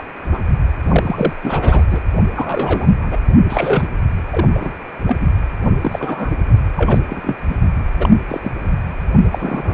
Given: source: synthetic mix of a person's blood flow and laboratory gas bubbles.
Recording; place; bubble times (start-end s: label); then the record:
Doppler ultrasound of blood flow; precordium
0.00-0.03 s: bubbles
0.32-0.39 s: bubbles
0.91-1.33 s: bubbles
1.43-1.85 s: bubbles
1.90-2.00 s: bubbles
2.35-2.89 s: bubbles
3.03-3.18 s: bubbles
3.49-3.87 s: bubbles
4.30-4.49 s: bubbles
4.54-4.73 s: bubbles
5.06-5.17 s: bubbles
5.21-5.27 s: bubbles
5.81-6.32 s: bubbles
6.77-7.00 s: bubbles
7.09-7.35 s: bubbles
7.49-7.57 s: bubbles
7.96-8.10 s: bubbles
8.29-8.52 s: bubbles
9.30-9.74 s: bubbles
From the record:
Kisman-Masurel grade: 243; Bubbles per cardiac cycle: several, 3 to 8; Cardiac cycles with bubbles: 100%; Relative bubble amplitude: loud (0.450 to 0.775); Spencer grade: 3 (all of the cardiac periods contain showers or single bubble signals, but not dominating or overriding the cardiac motion signals); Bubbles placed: anywhere in the cardiac cycle